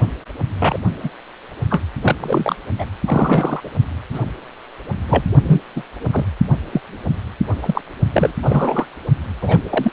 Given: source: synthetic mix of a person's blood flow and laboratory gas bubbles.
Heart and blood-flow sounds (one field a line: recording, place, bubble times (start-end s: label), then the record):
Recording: Doppler ultrasound of blood flow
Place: precordium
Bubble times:
0.60-0.79 s: bubbles
1.03-1.09 s: bubbles
1.70-1.80 s: bubbles
2.02-2.16 s: bubbles
2.20-2.56 s: bubbles
2.79-2.86 s: bubbles
3.06-3.61 s: bubbles
3.64-3.70 s: bubbles
4.13-4.20 s: bubbles
5.08-5.25 s: bubbles
5.43-5.62 s: bubbles
5.75-5.82 s: bubbles
6.12-6.25 s: bubbles
6.71-6.81 s: bubbles
7.62-7.82 s: bubbles
8.12-8.33 s: bubbles
8.42-8.87 s: bubbles
9.41-9.58 s: bubbles
9.70-9.93 s: bubbles
From the record:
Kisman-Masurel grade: 243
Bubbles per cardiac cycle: several, 3 to 8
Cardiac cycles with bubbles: 100%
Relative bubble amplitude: loud (0.450 to 0.775)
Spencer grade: 3 (all of the cardiac periods contain showers or single bubble signals, but not dominating or overriding the cardiac motion signals)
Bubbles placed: only in the low amplitude regions of the cardiac cycle